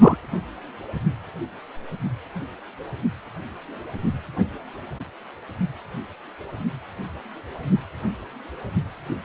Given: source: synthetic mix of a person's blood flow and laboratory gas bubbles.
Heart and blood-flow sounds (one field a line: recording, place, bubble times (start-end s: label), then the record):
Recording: Doppler ultrasound of blood flow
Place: precordium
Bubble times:
0.01-0.17 s: bubbles
From the record:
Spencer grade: 2 (many but less than half of the cardiac periods contain bubble signals, singularly or in groups)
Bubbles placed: anywhere in the cardiac cycle